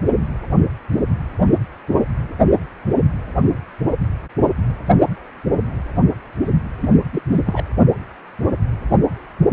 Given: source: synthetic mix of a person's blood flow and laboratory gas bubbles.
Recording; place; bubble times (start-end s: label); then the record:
Doppler ultrasound of blood flow; precordium
6.81-6.91 s: bubbles
7.12-7.22 s: bubbles
7.31-7.42 s: bubbles
7.46-7.63 s: bubbles
From the record:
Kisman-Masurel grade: 212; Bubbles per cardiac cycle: several, 3 to 8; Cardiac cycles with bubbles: 1 to 10%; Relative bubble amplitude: moderate (0.250 to 0.450); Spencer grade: 1 (occasional bubble signal discernible with the cardiac motion signal, with majority of cardiac periods free of bubbles); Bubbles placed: anywhere in the cardiac cycle